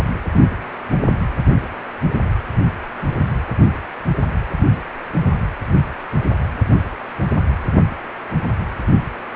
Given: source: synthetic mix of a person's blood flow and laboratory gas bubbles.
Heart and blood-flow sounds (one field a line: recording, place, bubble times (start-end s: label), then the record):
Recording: Doppler ultrasound of blood flow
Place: precordium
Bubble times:
0.00-0.05 s: bubbles
From the record:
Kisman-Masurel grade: 211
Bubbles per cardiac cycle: several, 3 to 8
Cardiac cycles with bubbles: 1 to 10%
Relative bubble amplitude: barely perceptible (0.100 to 0.250)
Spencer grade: 1 (occasional bubble signal discernible with the cardiac motion signal, with majority of cardiac periods free of bubbles)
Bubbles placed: anywhere in the cardiac cycle